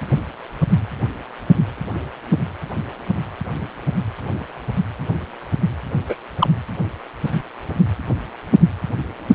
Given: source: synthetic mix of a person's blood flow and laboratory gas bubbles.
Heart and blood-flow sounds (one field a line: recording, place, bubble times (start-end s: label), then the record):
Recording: Doppler ultrasound of blood flow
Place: precordium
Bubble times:
6.08-6.16 s: bubbles
6.38-6.47 s: bubbles
From the record:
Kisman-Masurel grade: 123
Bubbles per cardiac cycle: 1 to 2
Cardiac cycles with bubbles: 10 to 50%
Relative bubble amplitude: loud (0.450 to 0.775)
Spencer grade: 2 (many but less than half of the cardiac periods contain bubble signals, singularly or in groups)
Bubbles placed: anywhere in the cardiac cycle